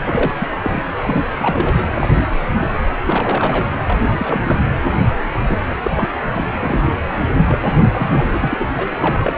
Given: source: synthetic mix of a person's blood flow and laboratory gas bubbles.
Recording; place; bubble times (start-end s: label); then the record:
Doppler ultrasound of blood flow; precordium
0.04-0.33 s: bubbles
0.39-0.47 s: bubbles
0.52-0.55 s: bubbles
0.60-0.82 s: bubbles
0.97-1.23 s: bubbles
1.39-1.86 s: bubbles
1.95-2.28 s: bubbles
2.42-2.67 s: bubbles
2.73-2.79 s: bubbles
3.04-3.71 s: bubbles
3.87-4.61 s: bubbles
5.47-5.59 s: bubbles
5.68-5.76 s: bubbles
5.83-6.09 s: bubbles
6.33-6.47 s: bubbles
6.58-6.85 s: bubbles
7.46-7.58 s: bubbles
7.63-7.75 s: bubbles
7.92-8.69 s: bubbles
8.75-8.86 s: bubbles
8.91-9.33 s: bubbles
From the record:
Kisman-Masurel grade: 342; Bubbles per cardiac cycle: rolling drumbeat, 9 or more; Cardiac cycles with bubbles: 100%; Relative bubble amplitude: moderate (0.250 to 0.450); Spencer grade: 3 (all of the cardiac periods contain showers or single bubble signals, but not dominating or overriding the cardiac motion signals); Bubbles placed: anywhere in the cardiac cycle